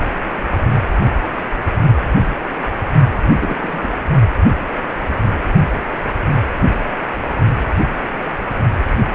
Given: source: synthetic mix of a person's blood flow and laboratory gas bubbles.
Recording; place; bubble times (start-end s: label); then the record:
Doppler ultrasound of blood flow; precordium
3.41-3.89 s: bubbles
From the record:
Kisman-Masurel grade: 112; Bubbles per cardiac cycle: 1 to 2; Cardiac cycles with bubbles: 1 to 10%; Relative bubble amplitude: moderate (0.250 to 0.450); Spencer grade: 1 (occasional bubble signal discernible with the cardiac motion signal, with majority of cardiac periods free of bubbles); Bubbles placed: only in the low amplitude regions of the cardiac cycle